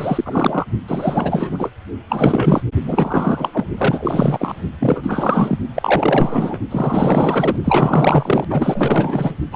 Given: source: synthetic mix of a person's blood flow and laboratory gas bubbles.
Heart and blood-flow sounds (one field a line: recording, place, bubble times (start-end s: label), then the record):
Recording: Doppler ultrasound of blood flow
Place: precordium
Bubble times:
0.00-0.65 s: bubbles
0.88-1.70 s: bubbles
2.09-2.62 s: bubbles
2.83-3.65 s: bubbles
3.77-4.56 s: bubbles
4.79-5.58 s: bubbles
5.75-6.58 s: bubbles
6.71-7.56 s: bubbles
7.64-8.45 s: bubbles
8.50-9.37 s: bubbles
9.52-9.56 s: bubbles
From the record:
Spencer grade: 4 (maximum detectable bubble signal sounding continuously throughout systole and diastole of every cardiac period, and overriding the amplitude of the normal cardiac signals)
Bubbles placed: only in the low amplitude regions of the cardiac cycle